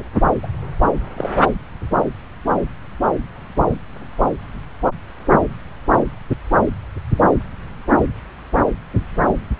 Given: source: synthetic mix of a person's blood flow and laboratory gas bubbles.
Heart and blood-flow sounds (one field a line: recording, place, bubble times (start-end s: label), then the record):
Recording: Doppler ultrasound of blood flow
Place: subclavian vein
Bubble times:
0.43-0.47 s: bubbles
1.17-1.29 s: bubbles
5.30-5.38 s: bubbles
From the record:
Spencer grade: 2 (many but less than half of the cardiac periods contain bubble signals, singularly or in groups)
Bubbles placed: anywhere in the cardiac cycle